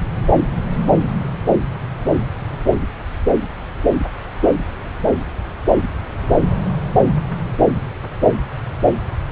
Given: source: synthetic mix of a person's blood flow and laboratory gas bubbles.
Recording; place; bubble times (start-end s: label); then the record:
Doppler ultrasound of blood flow; subclavian vein
no bubbles
From the record:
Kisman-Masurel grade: 000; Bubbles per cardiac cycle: 0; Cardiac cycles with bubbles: 0%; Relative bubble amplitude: no bubbles discernible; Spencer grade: 0 (complete lack of bubble signals)